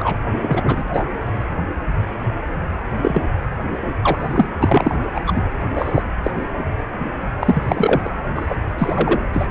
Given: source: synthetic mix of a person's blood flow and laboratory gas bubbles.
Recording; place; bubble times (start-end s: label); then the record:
Doppler ultrasound of blood flow; precordium
0.00-0.16 s: bubbles
0.41-0.84 s: bubbles
0.93-1.05 s: bubbles
3.02-3.22 s: bubbles
4.02-4.48 s: bubbles
4.62-4.95 s: bubbles
5.14-5.21 s: bubbles
5.26-5.43 s: bubbles
5.75-6.02 s: bubbles
6.23-6.32 s: bubbles
7.41-8.01 s: bubbles
8.04-8.09 s: bubbles
8.35-8.54 s: bubbles
8.78-9.20 s: bubbles
9.33-9.47 s: bubbles
From the record:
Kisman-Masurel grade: 233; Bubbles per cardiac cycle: several, 3 to 8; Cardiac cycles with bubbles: 50 to 99%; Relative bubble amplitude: loud (0.450 to 0.775); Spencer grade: 3 (all of the cardiac periods contain showers or single bubble signals, but not dominating or overriding the cardiac motion signals); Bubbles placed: anywhere in the cardiac cycle